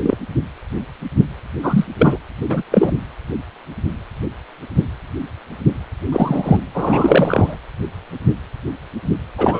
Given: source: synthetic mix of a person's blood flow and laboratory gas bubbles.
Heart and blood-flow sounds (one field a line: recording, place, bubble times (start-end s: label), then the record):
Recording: Doppler ultrasound of blood flow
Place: precordium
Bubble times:
0.02-0.17 s: bubbles
1.62-1.85 s: bubbles
1.98-2.18 s: bubbles
2.50-2.62 s: bubbles
2.71-2.92 s: bubbles
6.11-6.58 s: bubbles
6.74-7.56 s: bubbles
9.38-9.60 s: bubbles
From the record:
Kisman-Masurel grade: 233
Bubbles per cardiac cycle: several, 3 to 8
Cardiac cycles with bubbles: 50 to 99%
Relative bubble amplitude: loud (0.450 to 0.775)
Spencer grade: 3 (all of the cardiac periods contain showers or single bubble signals, but not dominating or overriding the cardiac motion signals)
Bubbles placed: anywhere in the cardiac cycle